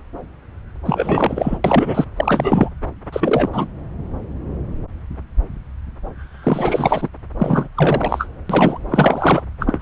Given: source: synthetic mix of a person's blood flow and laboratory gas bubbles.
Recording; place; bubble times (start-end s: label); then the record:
Doppler ultrasound of blood flow; subclavian vein
0.85-1.58 s: bubbles
1.64-2.05 s: bubbles
2.16-2.69 s: bubbles
3.12-3.50 s: bubbles
3.52-3.67 s: bubbles
6.43-7.09 s: bubbles
7.39-7.68 s: bubbles
7.75-8.28 s: bubbles
8.49-8.79 s: bubbles
8.88-9.42 s: bubbles
9.59-9.81 s: bubbles
From the record:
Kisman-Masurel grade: 333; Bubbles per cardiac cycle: rolling drumbeat, 9 or more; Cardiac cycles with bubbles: 50 to 99%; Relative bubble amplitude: loud (0.450 to 0.775); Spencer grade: 3 (all of the cardiac periods contain showers or single bubble signals, but not dominating or overriding the cardiac motion signals); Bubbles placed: anywhere in the cardiac cycle